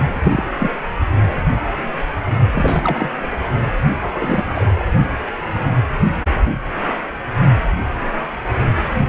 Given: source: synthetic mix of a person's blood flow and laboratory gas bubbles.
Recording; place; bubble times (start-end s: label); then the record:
Doppler ultrasound of blood flow; precordium
0.23-0.44 s: bubbles
0.58-0.71 s: bubbles
2.51-3.09 s: bubbles
3.22-3.27 s: bubbles
4.01-4.45 s: bubbles
4.54-4.83 s: bubbles
From the record:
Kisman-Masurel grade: 232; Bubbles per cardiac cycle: several, 3 to 8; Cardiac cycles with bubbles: 50 to 99%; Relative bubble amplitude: moderate (0.250 to 0.450); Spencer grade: 3 (all of the cardiac periods contain showers or single bubble signals, but not dominating or overriding the cardiac motion signals); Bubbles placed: only in the low amplitude regions of the cardiac cycle